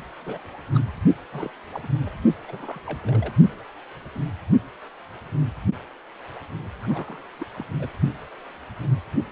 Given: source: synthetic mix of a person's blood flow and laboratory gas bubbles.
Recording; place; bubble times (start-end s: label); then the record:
Doppler ultrasound of blood flow; precordium
0.25-0.39 s: bubbles
0.73-0.82 s: bubbles
1.33-1.50 s: bubbles
1.72-1.80 s: bubbles
1.83-1.89 s: bubbles
2.06-2.10 s: bubbles
2.48-2.79 s: bubbles
2.86-2.99 s: bubbles
3.03-3.33 s: bubbles
6.83-7.25 s: bubbles
7.39-7.45 s: bubbles
7.57-7.65 s: bubbles
7.79-7.88 s: bubbles
From the record:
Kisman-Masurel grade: 221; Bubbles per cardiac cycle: several, 3 to 8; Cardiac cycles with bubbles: 10 to 50%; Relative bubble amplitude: barely perceptible (0.100 to 0.250); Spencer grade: 2 (many but less than half of the cardiac periods contain bubble signals, singularly or in groups); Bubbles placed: only in the low amplitude regions of the cardiac cycle